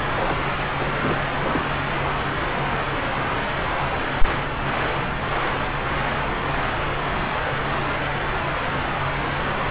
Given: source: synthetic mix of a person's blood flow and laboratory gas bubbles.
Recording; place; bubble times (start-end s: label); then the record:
Doppler ultrasound of blood flow; subclavian vein
0.16-0.35 s: bubbles
0.45-0.49 s: bubbles
0.79-0.91 s: bubbles
1.02-1.29 s: bubbles
1.44-1.65 s: bubbles
From the record:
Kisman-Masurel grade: 221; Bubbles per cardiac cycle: several, 3 to 8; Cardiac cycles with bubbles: 10 to 50%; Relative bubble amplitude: barely perceptible (0.100 to 0.250); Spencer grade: 2 (many but less than half of the cardiac periods contain bubble signals, singularly or in groups); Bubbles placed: anywhere in the cardiac cycle